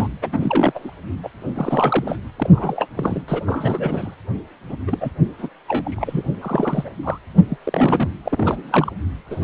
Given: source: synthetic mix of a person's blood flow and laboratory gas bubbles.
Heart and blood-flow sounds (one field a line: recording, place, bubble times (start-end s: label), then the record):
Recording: Doppler ultrasound of blood flow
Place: precordium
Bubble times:
0.00-0.08 s: bubbles
0.10-0.13 s: bubbles
0.22-0.91 s: bubbles
1.23-1.29 s: bubbles
1.55-2.18 s: bubbles
2.36-2.50 s: bubbles
2.53-2.87 s: bubbles
2.95-3.22 s: bubbles
3.28-3.41 s: bubbles
3.46-4.15 s: bubbles
4.69-4.77 s: bubbles
4.87-4.98 s: bubbles
5.00-5.12 s: bubbles
5.38-5.49 s: bubbles
5.67-6.23 s: bubbles
6.41-6.91 s: bubbles
7.03-7.18 s: bubbles
7.50-7.57 s: bubbles
7.64-8.09 s: bubbles
8.25-8.91 s: bubbles
9.27-9.44 s: bubbles
From the record:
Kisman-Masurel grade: 342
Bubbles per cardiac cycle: rolling drumbeat, 9 or more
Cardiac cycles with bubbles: 100%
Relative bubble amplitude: moderate (0.250 to 0.450)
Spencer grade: 3 (all of the cardiac periods contain showers or single bubble signals, but not dominating or overriding the cardiac motion signals)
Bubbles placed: anywhere in the cardiac cycle